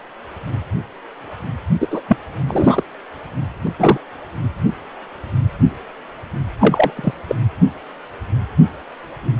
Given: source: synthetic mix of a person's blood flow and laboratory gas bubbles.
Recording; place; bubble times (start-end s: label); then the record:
Doppler ultrasound of blood flow; precordium
1.80-2.02 s: bubbles
2.08-2.17 s: bubbles
2.48-2.83 s: bubbles
3.66-3.70 s: bubbles
3.79-3.98 s: bubbles
6.59-6.91 s: bubbles
6.96-7.12 s: bubbles
7.28-7.36 s: bubbles
From the record:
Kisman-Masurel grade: 223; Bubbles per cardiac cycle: several, 3 to 8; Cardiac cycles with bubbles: 10 to 50%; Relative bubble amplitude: loud (0.450 to 0.775); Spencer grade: 2 (many but less than half of the cardiac periods contain bubble signals, singularly or in groups); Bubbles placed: anywhere in the cardiac cycle